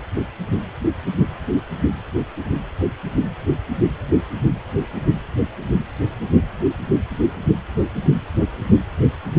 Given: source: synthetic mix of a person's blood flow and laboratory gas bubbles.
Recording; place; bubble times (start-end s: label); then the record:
Doppler ultrasound of blood flow; precordium
no bubbles
From the record:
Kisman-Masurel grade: 000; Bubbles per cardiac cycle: 0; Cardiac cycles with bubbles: 0%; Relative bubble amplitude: no bubbles discernible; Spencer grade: 0 (complete lack of bubble signals)